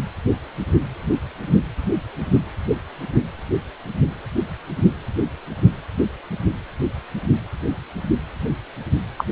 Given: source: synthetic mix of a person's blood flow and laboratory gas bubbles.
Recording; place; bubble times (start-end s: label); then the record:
Doppler ultrasound of blood flow; precordium
9.18-9.25 s: bubbles
From the record:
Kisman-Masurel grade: 213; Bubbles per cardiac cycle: several, 3 to 8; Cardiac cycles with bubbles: 1 to 10%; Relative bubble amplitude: loud (0.450 to 0.775); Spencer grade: 1 (occasional bubble signal discernible with the cardiac motion signal, with majority of cardiac periods free of bubbles); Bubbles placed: anywhere in the cardiac cycle